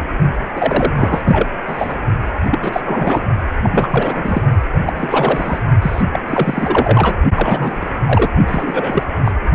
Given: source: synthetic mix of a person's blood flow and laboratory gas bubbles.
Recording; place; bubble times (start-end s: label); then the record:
Doppler ultrasound of blood flow; precordium
0.56-1.21 s: bubbles
1.24-1.50 s: bubbles
1.66-1.97 s: bubbles
2.51-2.81 s: bubbles
2.85-3.22 s: bubbles
3.61-3.88 s: bubbles
3.90-4.42 s: bubbles
4.85-5.59 s: bubbles
5.82-6.02 s: bubbles
6.12-6.19 s: bubbles
6.27-7.18 s: bubbles
7.34-7.91 s: bubbles
8.06-8.31 s: bubbles
8.47-9.04 s: bubbles
9.25-9.32 s: bubbles
From the record:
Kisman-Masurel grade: 343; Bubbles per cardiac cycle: rolling drumbeat, 9 or more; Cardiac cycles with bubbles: 100%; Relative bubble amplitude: loud (0.450 to 0.775); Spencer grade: 3 (all of the cardiac periods contain showers or single bubble signals, but not dominating or overriding the cardiac motion signals); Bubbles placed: only in the low amplitude regions of the cardiac cycle